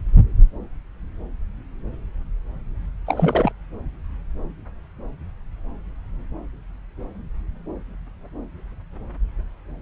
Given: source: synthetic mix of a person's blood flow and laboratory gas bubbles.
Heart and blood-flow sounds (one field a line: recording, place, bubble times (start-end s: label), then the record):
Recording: Doppler ultrasound of blood flow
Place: subclavian vein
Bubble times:
3.07-3.52 s: bubbles
From the record:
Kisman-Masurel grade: 212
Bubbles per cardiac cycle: several, 3 to 8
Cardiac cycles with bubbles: 1 to 10%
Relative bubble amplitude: moderate (0.250 to 0.450)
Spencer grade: 1 (occasional bubble signal discernible with the cardiac motion signal, with majority of cardiac periods free of bubbles)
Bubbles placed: anywhere in the cardiac cycle